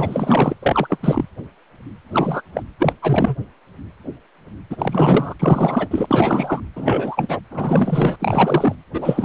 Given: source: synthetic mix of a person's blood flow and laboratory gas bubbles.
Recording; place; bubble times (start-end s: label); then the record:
Doppler ultrasound of blood flow; precordium
0.00-0.54 s: bubbles
0.62-0.97 s: bubbles
1.02-1.25 s: bubbles
2.13-2.42 s: bubbles
2.55-2.62 s: bubbles
2.80-2.93 s: bubbles
3.02-3.36 s: bubbles
4.70-5.34 s: bubbles
5.39-5.88 s: bubbles
5.91-6.60 s: bubbles
6.75-7.40 s: bubbles
7.50-8.16 s: bubbles
8.20-8.75 s: bubbles
8.93-9.24 s: bubbles
From the record:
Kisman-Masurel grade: 333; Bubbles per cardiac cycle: rolling drumbeat, 9 or more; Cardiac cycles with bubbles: 50 to 99%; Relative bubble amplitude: loud (0.450 to 0.775); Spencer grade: 3 (all of the cardiac periods contain showers or single bubble signals, but not dominating or overriding the cardiac motion signals); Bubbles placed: anywhere in the cardiac cycle